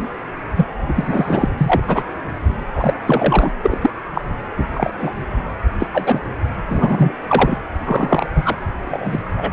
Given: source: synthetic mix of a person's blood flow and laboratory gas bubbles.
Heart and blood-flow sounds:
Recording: Doppler ultrasound of blood flow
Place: precordium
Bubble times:
0.00-0.08 s: bubbles
0.56-0.66 s: bubbles
0.88-1.50 s: bubbles
1.57-1.80 s: bubbles
1.87-2.03 s: bubbles
2.74-2.94 s: bubbles
3.05-3.51 s: bubbles
3.62-3.78 s: bubbles
3.81-3.90 s: bubbles
4.14-4.21 s: bubbles
4.57-4.65 s: bubbles
4.73-4.91 s: bubbles
4.98-5.11 s: bubbles
5.79-5.88 s: bubbles
5.93-6.21 s: bubbles
6.69-7.12 s: bubbles
7.28-7.59 s: bubbles
7.86-8.27 s: bubbles
8.35-8.57 s: bubbles
8.91-9.20 s: bubbles
9.37-9.51 s: bubbles
From the record:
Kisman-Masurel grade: 243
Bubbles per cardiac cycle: several, 3 to 8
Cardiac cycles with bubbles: 100%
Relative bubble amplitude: loud (0.450 to 0.775)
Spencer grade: 3 (all of the cardiac periods contain showers or single bubble signals, but not dominating or overriding the cardiac motion signals)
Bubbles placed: anywhere in the cardiac cycle

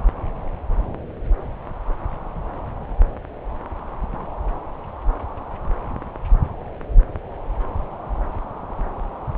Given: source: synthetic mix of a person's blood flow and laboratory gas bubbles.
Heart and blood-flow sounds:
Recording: Doppler ultrasound of blood flow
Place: subclavian vein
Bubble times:
no bubbles
From the record:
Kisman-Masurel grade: 000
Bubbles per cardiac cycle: 0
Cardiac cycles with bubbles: 0%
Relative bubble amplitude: no bubbles discernible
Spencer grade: 0 (complete lack of bubble signals)

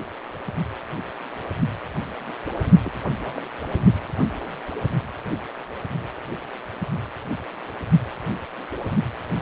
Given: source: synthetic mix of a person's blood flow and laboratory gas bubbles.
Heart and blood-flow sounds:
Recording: Doppler ultrasound of blood flow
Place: precordium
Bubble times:
2.83-2.91 s: bubbles
3.23-3.33 s: bubbles
3.37-3.43 s: bubbles
From the record:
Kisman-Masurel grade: 211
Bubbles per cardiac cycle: several, 3 to 8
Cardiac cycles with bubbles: 1 to 10%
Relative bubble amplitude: barely perceptible (0.100 to 0.250)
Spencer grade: 1 (occasional bubble signal discernible with the cardiac motion signal, with majority of cardiac periods free of bubbles)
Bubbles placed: only in the low amplitude regions of the cardiac cycle

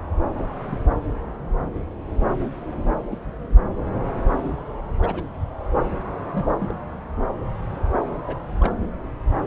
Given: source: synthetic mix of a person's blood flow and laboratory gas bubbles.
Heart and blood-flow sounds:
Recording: Doppler ultrasound of blood flow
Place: subclavian vein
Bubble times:
3.11-3.17 s: bubbles
5.02-5.23 s: bubbles
6.22-6.58 s: bubbles
6.61-6.75 s: bubbles
8.27-8.36 s: bubbles
8.60-8.73 s: bubbles
From the record:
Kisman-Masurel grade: 121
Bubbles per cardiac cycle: 1 to 2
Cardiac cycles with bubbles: 10 to 50%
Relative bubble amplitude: barely perceptible (0.100 to 0.250)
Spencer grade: 2 (many but less than half of the cardiac periods contain bubble signals, singularly or in groups)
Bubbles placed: anywhere in the cardiac cycle

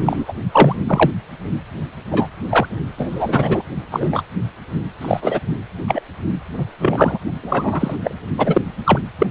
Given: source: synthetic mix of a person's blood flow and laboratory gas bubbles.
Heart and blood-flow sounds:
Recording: Doppler ultrasound of blood flow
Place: precordium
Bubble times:
0.00-0.24 s: bubbles
0.28-0.33 s: bubbles
0.52-0.76 s: bubbles
0.88-1.10 s: bubbles
2.11-2.27 s: bubbles
2.50-2.67 s: bubbles
2.98-3.63 s: bubbles
3.91-4.22 s: bubbles
5.01-5.39 s: bubbles
5.88-6.02 s: bubbles
6.57-6.65 s: bubbles
6.80-7.18 s: bubbles
7.42-7.96 s: bubbles
8.02-8.14 s: bubbles
8.38-8.62 s: bubbles
8.84-8.99 s: bubbles
9.18-9.26 s: bubbles
From the record:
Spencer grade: 3 (all of the cardiac periods contain showers or single bubble signals, but not dominating or overriding the cardiac motion signals)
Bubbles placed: only in the low amplitude regions of the cardiac cycle

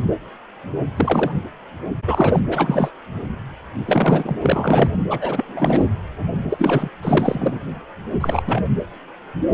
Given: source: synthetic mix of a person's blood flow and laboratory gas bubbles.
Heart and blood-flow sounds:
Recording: Doppler ultrasound of blood flow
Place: precordium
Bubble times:
0.96-1.32 s: bubbles
2.07-2.40 s: bubbles
2.49-2.91 s: bubbles
3.86-4.37 s: bubbles
4.42-4.90 s: bubbles
5.10-5.19 s: bubbles
5.21-5.85 s: bubbles
6.50-6.89 s: bubbles
7.02-7.58 s: bubbles
8.21-8.43 s: bubbles
8.47-8.63 s: bubbles
From the record:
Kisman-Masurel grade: 332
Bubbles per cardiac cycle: rolling drumbeat, 9 or more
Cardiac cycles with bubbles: 50 to 99%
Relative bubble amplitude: moderate (0.250 to 0.450)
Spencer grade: 3 (all of the cardiac periods contain showers or single bubble signals, but not dominating or overriding the cardiac motion signals)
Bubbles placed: anywhere in the cardiac cycle

